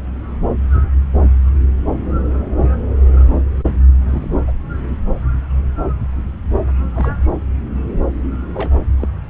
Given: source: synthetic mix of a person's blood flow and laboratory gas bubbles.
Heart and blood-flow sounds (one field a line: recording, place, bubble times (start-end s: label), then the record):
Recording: Doppler ultrasound of blood flow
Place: subclavian vein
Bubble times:
4.11-4.34 s: bubbles
4.47-4.54 s: bubbles
6.95-7.18 s: bubbles
7.21-7.28 s: bubbles
8.54-8.71 s: bubbles
8.99-9.07 s: bubbles
From the record:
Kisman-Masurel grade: 121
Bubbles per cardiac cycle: 1 to 2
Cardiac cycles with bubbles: 10 to 50%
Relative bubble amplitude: barely perceptible (0.100 to 0.250)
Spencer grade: 2 (many but less than half of the cardiac periods contain bubble signals, singularly or in groups)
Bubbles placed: anywhere in the cardiac cycle